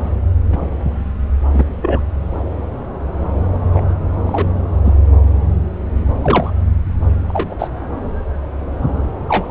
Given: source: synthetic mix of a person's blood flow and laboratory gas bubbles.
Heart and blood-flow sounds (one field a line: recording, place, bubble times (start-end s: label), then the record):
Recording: Doppler ultrasound of blood flow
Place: subclavian vein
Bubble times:
0.49-0.67 s: bubbles
1.54-1.64 s: bubbles
1.81-2.02 s: bubbles
3.74-3.82 s: bubbles
4.27-4.46 s: bubbles
4.84-4.93 s: bubbles
6.22-6.51 s: bubbles
7.28-7.55 s: bubbles
7.58-7.68 s: bubbles
9.27-9.51 s: bubbles
From the record:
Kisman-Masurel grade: 123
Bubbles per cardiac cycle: 1 to 2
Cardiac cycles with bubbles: 10 to 50%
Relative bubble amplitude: loud (0.450 to 0.775)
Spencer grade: 2 (many but less than half of the cardiac periods contain bubble signals, singularly or in groups)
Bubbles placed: anywhere in the cardiac cycle